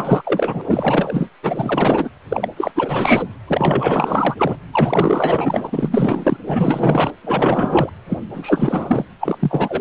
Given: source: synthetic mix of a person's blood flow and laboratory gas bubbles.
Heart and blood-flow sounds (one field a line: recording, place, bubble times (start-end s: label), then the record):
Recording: Doppler ultrasound of blood flow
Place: precordium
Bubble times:
0.00-0.61 s: bubbles
0.69-1.29 s: bubbles
1.42-2.08 s: bubbles
2.29-2.48 s: bubbles
2.56-3.24 s: bubbles
3.47-4.57 s: bubbles
4.73-6.37 s: bubbles
6.47-7.11 s: bubbles
7.22-7.90 s: bubbles
8.08-8.18 s: bubbles
8.33-9.05 s: bubbles
9.20-9.81 s: bubbles
From the record:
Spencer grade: 4 (maximum detectable bubble signal sounding continuously throughout systole and diastole of every cardiac period, and overriding the amplitude of the normal cardiac signals)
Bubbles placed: anywhere in the cardiac cycle